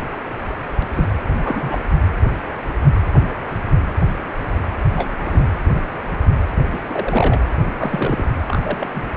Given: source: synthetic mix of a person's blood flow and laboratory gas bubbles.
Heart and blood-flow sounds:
Doppler ultrasound of blood flow; precordium
0.94-1.05 s: bubbles
1.20-1.83 s: bubbles
4.96-5.10 s: bubbles
5.22-5.46 s: bubbles
6.72-6.80 s: bubbles
6.89-7.41 s: bubbles
7.77-8.28 s: bubbles
8.48-8.88 s: bubbles
8.94-9.07 s: bubbles
From the record:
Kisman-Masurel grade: 222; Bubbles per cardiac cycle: several, 3 to 8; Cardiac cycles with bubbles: 10 to 50%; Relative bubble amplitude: moderate (0.250 to 0.450); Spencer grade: 2 (many but less than half of the cardiac periods contain bubble signals, singularly or in groups); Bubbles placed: anywhere in the cardiac cycle

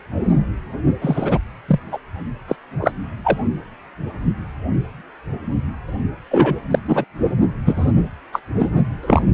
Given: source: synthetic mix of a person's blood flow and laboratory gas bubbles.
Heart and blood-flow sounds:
Doppler ultrasound of blood flow; precordium
1.01-1.39 s: bubbles
1.68-1.80 s: bubbles
1.91-1.98 s: bubbles
2.47-2.55 s: bubbles
2.82-2.92 s: bubbles
3.24-3.38 s: bubbles
6.30-6.55 s: bubbles
6.71-6.79 s: bubbles
6.88-7.04 s: bubbles
7.65-7.92 s: bubbles
8.32-8.40 s: bubbles
8.58-8.69 s: bubbles
9.02-9.22 s: bubbles
From the record:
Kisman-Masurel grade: 233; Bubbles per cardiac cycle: several, 3 to 8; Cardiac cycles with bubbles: 50 to 99%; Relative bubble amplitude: loud (0.450 to 0.775); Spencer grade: 3 (all of the cardiac periods contain showers or single bubble signals, but not dominating or overriding the cardiac motion signals); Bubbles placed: only in the low amplitude regions of the cardiac cycle

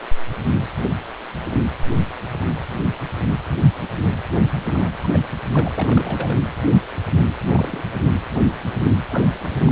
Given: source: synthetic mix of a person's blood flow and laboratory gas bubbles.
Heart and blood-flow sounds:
Doppler ultrasound of blood flow; precordium
4.68-4.91 s: bubbles
5.03-5.07 s: bubbles
5.12-5.20 s: bubbles
5.54-5.69 s: bubbles
5.75-6.37 s: bubbles
7.48-7.83 s: bubbles
9.06-9.72 s: bubbles
From the record:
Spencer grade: 2 (many but less than half of the cardiac periods contain bubble signals, singularly or in groups); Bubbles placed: anywhere in the cardiac cycle

